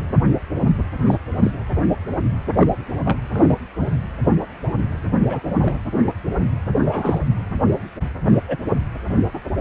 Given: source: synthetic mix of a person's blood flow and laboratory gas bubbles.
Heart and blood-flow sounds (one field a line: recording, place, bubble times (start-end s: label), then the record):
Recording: Doppler ultrasound of blood flow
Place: precordium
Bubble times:
1.06-1.18 s: bubbles
1.43-1.51 s: bubbles
2.56-2.71 s: bubbles
3.05-3.18 s: bubbles
3.33-3.55 s: bubbles
5.29-5.40 s: bubbles
5.60-5.74 s: bubbles
6.79-7.18 s: bubbles
8.48-8.56 s: bubbles
From the record:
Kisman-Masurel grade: 122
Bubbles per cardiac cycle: 1 to 2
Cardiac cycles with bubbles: 10 to 50%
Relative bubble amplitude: moderate (0.250 to 0.450)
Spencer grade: 2 (many but less than half of the cardiac periods contain bubble signals, singularly or in groups)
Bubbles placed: anywhere in the cardiac cycle